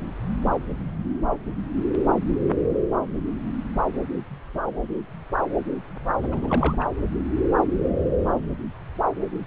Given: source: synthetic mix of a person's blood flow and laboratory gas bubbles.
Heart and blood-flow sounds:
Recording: Doppler ultrasound of blood flow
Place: subclavian vein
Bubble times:
6.22-6.29 s: bubbles
6.31-6.76 s: bubbles
6.80-6.84 s: bubbles
From the record:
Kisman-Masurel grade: 211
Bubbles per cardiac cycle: several, 3 to 8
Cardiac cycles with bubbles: 1 to 10%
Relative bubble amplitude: barely perceptible (0.100 to 0.250)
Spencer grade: 1 (occasional bubble signal discernible with the cardiac motion signal, with majority of cardiac periods free of bubbles)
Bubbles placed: anywhere in the cardiac cycle

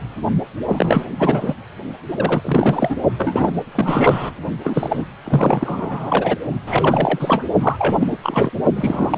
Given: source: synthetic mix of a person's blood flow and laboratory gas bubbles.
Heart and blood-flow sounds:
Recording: Doppler ultrasound of blood flow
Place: precordium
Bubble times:
0.68-1.06 s: bubbles
1.15-1.55 s: bubbles
2.08-2.96 s: bubbles
3.17-3.51 s: bubbles
3.71-4.30 s: bubbles
4.63-5.05 s: bubbles
5.25-6.36 s: bubbles
6.66-7.45 s: bubbles
7.61-8.18 s: bubbles
8.22-8.50 s: bubbles
8.75-9.17 s: bubbles
From the record:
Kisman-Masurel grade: 333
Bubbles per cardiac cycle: rolling drumbeat, 9 or more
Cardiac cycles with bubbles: 50 to 99%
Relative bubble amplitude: loud (0.450 to 0.775)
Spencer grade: 3 (all of the cardiac periods contain showers or single bubble signals, but not dominating or overriding the cardiac motion signals)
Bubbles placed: only in the low amplitude regions of the cardiac cycle

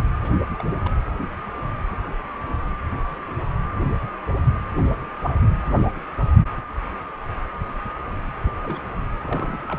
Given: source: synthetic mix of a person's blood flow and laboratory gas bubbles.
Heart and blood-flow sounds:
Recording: Doppler ultrasound of blood flow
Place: precordium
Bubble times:
0.23-0.36 s: bubbles
0.57-0.64 s: bubbles
0.84-0.92 s: bubbles
8.44-8.54 s: bubbles
8.62-8.84 s: bubbles
9.21-9.79 s: bubbles
From the record:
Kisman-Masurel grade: 221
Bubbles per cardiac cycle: several, 3 to 8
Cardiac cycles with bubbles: 10 to 50%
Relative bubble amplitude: barely perceptible (0.100 to 0.250)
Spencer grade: 2 (many but less than half of the cardiac periods contain bubble signals, singularly or in groups)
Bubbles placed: anywhere in the cardiac cycle

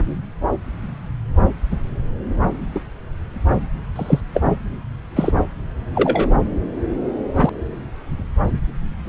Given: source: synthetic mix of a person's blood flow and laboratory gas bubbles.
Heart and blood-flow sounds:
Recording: Doppler ultrasound of blood flow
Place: subclavian vein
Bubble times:
2.75-2.80 s: bubbles
3.96-4.21 s: bubbles
4.34-4.42 s: bubbles
5.15-5.31 s: bubbles
5.95-6.29 s: bubbles
7.35-7.50 s: bubbles
From the record:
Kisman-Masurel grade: 123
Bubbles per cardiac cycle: 1 to 2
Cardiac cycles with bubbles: 10 to 50%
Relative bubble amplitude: loud (0.450 to 0.775)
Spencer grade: 2 (many but less than half of the cardiac periods contain bubble signals, singularly or in groups)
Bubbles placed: anywhere in the cardiac cycle

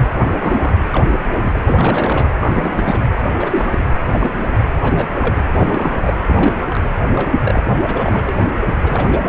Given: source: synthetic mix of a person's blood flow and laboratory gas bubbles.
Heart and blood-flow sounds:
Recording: Doppler ultrasound of blood flow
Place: precordium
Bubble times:
0.27-0.73 s: bubbles
0.92-1.17 s: bubbles
1.42-2.26 s: bubbles
2.39-3.00 s: bubbles
3.19-3.25 s: bubbles
3.38-3.85 s: bubbles
4.11-4.43 s: bubbles
4.57-4.65 s: bubbles
4.83-5.07 s: bubbles
5.19-5.42 s: bubbles
5.58-6.13 s: bubbles
6.28-6.85 s: bubbles
7.16-7.31 s: bubbles
7.44-7.63 s: bubbles
7.88-8.37 s: bubbles
8.83-9.20 s: bubbles
From the record:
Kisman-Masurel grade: 242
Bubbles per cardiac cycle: several, 3 to 8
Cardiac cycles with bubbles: 100%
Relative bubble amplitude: moderate (0.250 to 0.450)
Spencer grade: 3 (all of the cardiac periods contain showers or single bubble signals, but not dominating or overriding the cardiac motion signals)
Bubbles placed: anywhere in the cardiac cycle

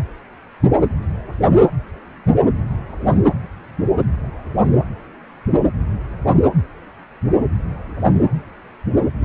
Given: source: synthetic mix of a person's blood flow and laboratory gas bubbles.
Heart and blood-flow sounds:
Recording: Doppler ultrasound of blood flow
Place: precordium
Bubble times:
9.20-9.24 s: bubbles
From the record:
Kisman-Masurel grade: 123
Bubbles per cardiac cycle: 1 to 2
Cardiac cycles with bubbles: 10 to 50%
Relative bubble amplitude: loud (0.450 to 0.775)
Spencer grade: 2 (many but less than half of the cardiac periods contain bubble signals, singularly or in groups)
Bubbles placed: anywhere in the cardiac cycle

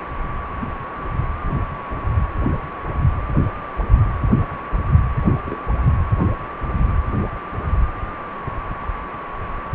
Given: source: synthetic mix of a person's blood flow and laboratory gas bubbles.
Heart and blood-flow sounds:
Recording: Doppler ultrasound of blood flow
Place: precordium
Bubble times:
5.44-5.57 s: bubbles
From the record:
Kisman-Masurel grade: 111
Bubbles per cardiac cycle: 1 to 2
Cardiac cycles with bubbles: 1 to 10%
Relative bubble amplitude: barely perceptible (0.100 to 0.250)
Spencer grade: 1 (occasional bubble signal discernible with the cardiac motion signal, with majority of cardiac periods free of bubbles)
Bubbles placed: anywhere in the cardiac cycle

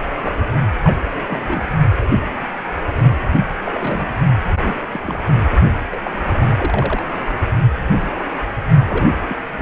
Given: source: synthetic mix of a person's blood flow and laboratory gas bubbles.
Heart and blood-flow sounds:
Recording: Doppler ultrasound of blood flow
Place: precordium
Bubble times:
0.21-0.35 s: bubbles
0.83-0.98 s: bubbles
1.14-1.64 s: bubbles
3.40-3.46 s: bubbles
3.65-4.09 s: bubbles
4.47-4.75 s: bubbles
4.92-5.25 s: bubbles
5.91-6.01 s: bubbles
6.04-6.10 s: bubbles
6.14-6.21 s: bubbles
6.40-6.49 s: bubbles
6.57-7.03 s: bubbles
8.89-9.08 s: bubbles
9.21-9.25 s: bubbles
9.29-9.37 s: bubbles
9.59-9.62 s: bubbles
From the record:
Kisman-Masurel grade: 232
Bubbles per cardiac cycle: several, 3 to 8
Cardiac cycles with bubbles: 50 to 99%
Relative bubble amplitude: moderate (0.250 to 0.450)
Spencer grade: 3 (all of the cardiac periods contain showers or single bubble signals, but not dominating or overriding the cardiac motion signals)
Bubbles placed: only in the low amplitude regions of the cardiac cycle

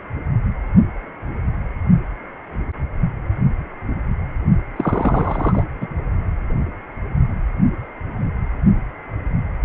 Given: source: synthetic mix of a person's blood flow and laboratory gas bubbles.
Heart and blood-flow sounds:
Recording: Doppler ultrasound of blood flow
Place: precordium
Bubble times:
4.76-5.64 s: bubbles
5.81-5.88 s: bubbles
From the record:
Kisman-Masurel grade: 222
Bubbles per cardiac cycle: several, 3 to 8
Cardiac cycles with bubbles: 10 to 50%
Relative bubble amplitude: moderate (0.250 to 0.450)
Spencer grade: 2 (many but less than half of the cardiac periods contain bubble signals, singularly or in groups)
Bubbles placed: only in the low amplitude regions of the cardiac cycle

